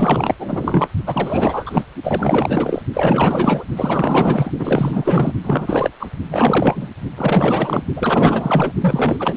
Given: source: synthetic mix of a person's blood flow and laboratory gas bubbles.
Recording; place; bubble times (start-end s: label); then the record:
Doppler ultrasound of blood flow; precordium
0.00-0.35 s: bubbles
0.39-0.89 s: bubbles
1.05-1.83 s: bubbles
2.04-2.82 s: bubbles
2.93-3.65 s: bubbles
3.75-4.51 s: bubbles
4.58-5.33 s: bubbles
5.43-5.92 s: bubbles
6.00-6.08 s: bubbles
6.29-6.88 s: bubbles
7.17-7.84 s: bubbles
7.96-8.72 s: bubbles
8.80-9.36 s: bubbles
From the record:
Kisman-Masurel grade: 444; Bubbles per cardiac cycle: continuous sound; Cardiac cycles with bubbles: 100%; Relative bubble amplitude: maximal (0.775 to 0.999); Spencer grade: 4 (maximum detectable bubble signal sounding continuously throughout systole and diastole of every cardiac period, and overriding the amplitude of the normal cardiac signals); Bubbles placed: only in the low amplitude regions of the cardiac cycle